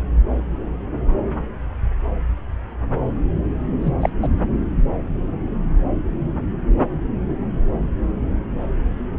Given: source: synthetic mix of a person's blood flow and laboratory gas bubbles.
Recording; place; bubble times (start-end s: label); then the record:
Doppler ultrasound of blood flow; subclavian vein
3.81-3.91 s: bubbles
4.00-4.10 s: bubbles
4.22-4.28 s: bubbles
From the record:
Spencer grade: 1 (occasional bubble signal discernible with the cardiac motion signal, with majority of cardiac periods free of bubbles); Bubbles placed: anywhere in the cardiac cycle